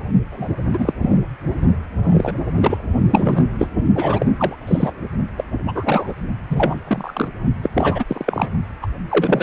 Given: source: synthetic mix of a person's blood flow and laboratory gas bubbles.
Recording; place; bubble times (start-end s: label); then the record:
Doppler ultrasound of blood flow; precordium
0.31-0.48 s: bubbles
0.73-0.94 s: bubbles
1.02-1.20 s: bubbles
2.03-2.33 s: bubbles
2.56-2.82 s: bubbles
3.10-3.44 s: bubbles
3.58-3.68 s: bubbles
3.95-4.26 s: bubbles
4.38-4.56 s: bubbles
4.67-4.91 s: bubbles
5.37-5.45 s: bubbles
5.65-6.13 s: bubbles
6.50-6.79 s: bubbles
6.85-7.28 s: bubbles
7.62-7.70 s: bubbles
7.73-8.04 s: bubbles
8.07-8.49 s: bubbles
8.82-8.87 s: bubbles
9.09-9.43 s: bubbles
From the record:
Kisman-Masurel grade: 233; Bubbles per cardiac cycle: several, 3 to 8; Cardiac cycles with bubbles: 50 to 99%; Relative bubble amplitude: loud (0.450 to 0.775); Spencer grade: 3 (all of the cardiac periods contain showers or single bubble signals, but not dominating or overriding the cardiac motion signals); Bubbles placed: only in the low amplitude regions of the cardiac cycle